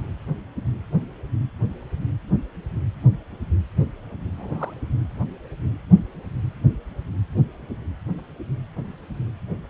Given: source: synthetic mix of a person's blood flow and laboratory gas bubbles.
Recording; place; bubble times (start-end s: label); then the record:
Doppler ultrasound of blood flow; precordium
4.38-4.74 s: bubbles
From the record:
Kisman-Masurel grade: 111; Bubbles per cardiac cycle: 1 to 2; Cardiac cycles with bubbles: 1 to 10%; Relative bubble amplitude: barely perceptible (0.100 to 0.250); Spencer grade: 1 (occasional bubble signal discernible with the cardiac motion signal, with majority of cardiac periods free of bubbles); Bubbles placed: anywhere in the cardiac cycle